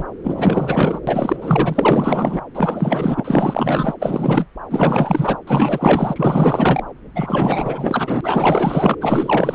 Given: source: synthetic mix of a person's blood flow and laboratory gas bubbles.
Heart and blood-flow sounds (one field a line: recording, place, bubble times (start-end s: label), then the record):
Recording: Doppler ultrasound of blood flow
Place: subclavian vein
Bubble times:
0.00-0.04 s: bubbles
0.23-1.00 s: bubbles
1.07-2.41 s: bubbles
2.54-3.94 s: bubbles
3.99-4.46 s: bubbles
4.70-5.37 s: bubbles
5.47-6.83 s: bubbles
7.15-8.95 s: bubbles
9.00-9.55 s: bubbles
From the record:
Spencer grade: 4 (maximum detectable bubble signal sounding continuously throughout systole and diastole of every cardiac period, and overriding the amplitude of the normal cardiac signals)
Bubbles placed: anywhere in the cardiac cycle